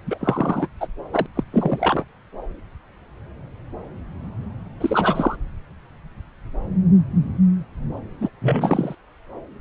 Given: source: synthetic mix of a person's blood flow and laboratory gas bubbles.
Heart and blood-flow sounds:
Doppler ultrasound of blood flow; subclavian vein
0.07-0.68 s: bubbles
0.80-0.88 s: bubbles
1.12-1.27 s: bubbles
1.35-1.44 s: bubbles
1.52-2.04 s: bubbles
4.80-5.36 s: bubbles
8.20-8.29 s: bubbles
8.41-8.95 s: bubbles
From the record:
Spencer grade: 3 (all of the cardiac periods contain showers or single bubble signals, but not dominating or overriding the cardiac motion signals); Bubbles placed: anywhere in the cardiac cycle

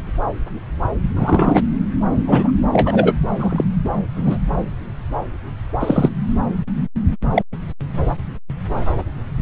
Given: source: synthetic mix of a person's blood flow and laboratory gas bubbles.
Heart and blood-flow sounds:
Doppler ultrasound of blood flow; subclavian vein
1.15-1.60 s: bubbles
2.17-2.57 s: bubbles
2.73-3.13 s: bubbles
3.39-3.65 s: bubbles
3.84-3.88 s: bubbles
4.16-4.38 s: bubbles
5.79-6.09 s: bubbles
7.34-7.43 s: bubbles
9.37-9.42 s: bubbles
From the record:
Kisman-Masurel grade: 123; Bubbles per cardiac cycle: 1 to 2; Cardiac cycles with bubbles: 10 to 50%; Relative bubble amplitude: loud (0.450 to 0.775); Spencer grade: 2 (many but less than half of the cardiac periods contain bubble signals, singularly or in groups); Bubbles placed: anywhere in the cardiac cycle

